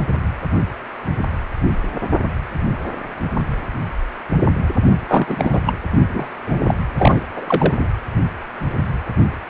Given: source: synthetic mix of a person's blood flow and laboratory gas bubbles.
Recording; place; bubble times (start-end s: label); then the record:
Doppler ultrasound of blood flow; precordium
5.08-5.61 s: bubbles
5.66-5.74 s: bubbles
6.13-6.27 s: bubbles
6.46-6.75 s: bubbles
6.99-7.21 s: bubbles
7.36-7.75 s: bubbles
7.78-7.88 s: bubbles
From the record:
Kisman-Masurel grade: 223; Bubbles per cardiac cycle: several, 3 to 8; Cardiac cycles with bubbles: 10 to 50%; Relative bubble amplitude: loud (0.450 to 0.775); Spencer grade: 2 (many but less than half of the cardiac periods contain bubble signals, singularly or in groups); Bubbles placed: anywhere in the cardiac cycle